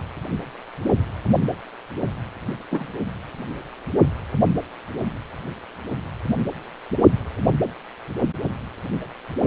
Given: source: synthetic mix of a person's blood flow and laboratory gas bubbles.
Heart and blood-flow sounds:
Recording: Doppler ultrasound of blood flow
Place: precordium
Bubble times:
2.71-2.88 s: bubbles
From the record:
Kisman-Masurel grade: 113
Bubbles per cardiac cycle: 1 to 2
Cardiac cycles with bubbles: 1 to 10%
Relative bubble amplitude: loud (0.450 to 0.775)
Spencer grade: 1 (occasional bubble signal discernible with the cardiac motion signal, with majority of cardiac periods free of bubbles)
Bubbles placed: only in the low amplitude regions of the cardiac cycle

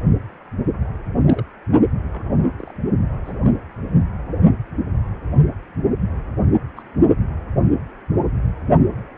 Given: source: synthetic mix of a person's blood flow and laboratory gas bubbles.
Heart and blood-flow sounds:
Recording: Doppler ultrasound of blood flow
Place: precordium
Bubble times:
1.17-1.45 s: bubbles
2.12-2.55 s: bubbles
2.60-2.73 s: bubbles
3.25-3.38 s: bubbles
3.43-3.50 s: bubbles
6.76-6.82 s: bubbles
From the record:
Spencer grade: 2 (many but less than half of the cardiac periods contain bubble signals, singularly or in groups)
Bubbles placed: only in the low amplitude regions of the cardiac cycle

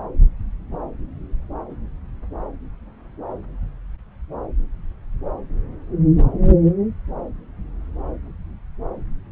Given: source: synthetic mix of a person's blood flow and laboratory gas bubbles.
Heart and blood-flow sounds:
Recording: Doppler ultrasound of blood flow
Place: subclavian vein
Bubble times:
no bubbles
From the record:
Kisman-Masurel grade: 000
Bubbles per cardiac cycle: 0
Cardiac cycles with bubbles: 0%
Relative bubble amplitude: no bubbles discernible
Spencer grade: 0 (complete lack of bubble signals)

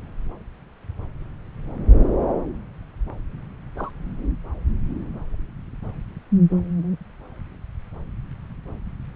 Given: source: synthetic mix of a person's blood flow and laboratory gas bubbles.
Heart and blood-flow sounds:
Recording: Doppler ultrasound of blood flow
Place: subclavian vein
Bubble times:
3.77-3.91 s: bubbles
From the record:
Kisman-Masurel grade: 111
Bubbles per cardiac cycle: 1 to 2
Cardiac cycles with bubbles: 1 to 10%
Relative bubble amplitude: barely perceptible (0.100 to 0.250)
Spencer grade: 1 (occasional bubble signal discernible with the cardiac motion signal, with majority of cardiac periods free of bubbles)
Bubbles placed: anywhere in the cardiac cycle

